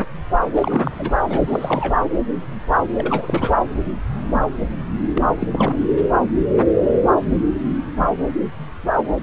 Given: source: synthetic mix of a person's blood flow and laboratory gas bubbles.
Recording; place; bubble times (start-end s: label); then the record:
Doppler ultrasound of blood flow; subclavian vein
0.54-1.19 s: bubbles
1.28-1.99 s: bubbles
2.97-3.57 s: bubbles
5.13-5.23 s: bubbles
5.37-5.48 s: bubbles
5.51-5.80 s: bubbles
From the record:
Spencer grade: 2 (many but less than half of the cardiac periods contain bubble signals, singularly or in groups); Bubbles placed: anywhere in the cardiac cycle